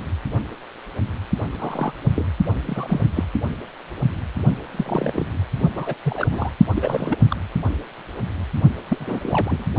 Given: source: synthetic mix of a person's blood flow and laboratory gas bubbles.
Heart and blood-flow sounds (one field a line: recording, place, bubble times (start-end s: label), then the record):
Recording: Doppler ultrasound of blood flow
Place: precordium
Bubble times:
1.59-1.92 s: bubbles
2.15-2.26 s: bubbles
2.65-3.02 s: bubbles
3.16-3.24 s: bubbles
4.71-5.25 s: bubbles
5.75-5.95 s: bubbles
6.04-6.27 s: bubbles
6.31-6.50 s: bubbles
6.75-7.18 s: bubbles
7.30-7.37 s: bubbles
8.88-9.19 s: bubbles
9.22-9.67 s: bubbles
From the record:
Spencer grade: 3 (all of the cardiac periods contain showers or single bubble signals, but not dominating or overriding the cardiac motion signals)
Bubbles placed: only in the low amplitude regions of the cardiac cycle